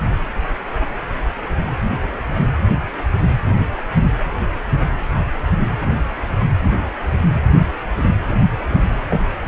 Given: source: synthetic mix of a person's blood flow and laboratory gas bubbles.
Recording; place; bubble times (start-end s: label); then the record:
Doppler ultrasound of blood flow; precordium
8.28-8.33 s: bubbles
8.70-8.84 s: bubbles
9.10-9.21 s: bubbles
From the record:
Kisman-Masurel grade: 122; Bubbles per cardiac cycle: 1 to 2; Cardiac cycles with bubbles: 10 to 50%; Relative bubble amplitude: moderate (0.250 to 0.450); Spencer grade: 2 (many but less than half of the cardiac periods contain bubble signals, singularly or in groups); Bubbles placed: anywhere in the cardiac cycle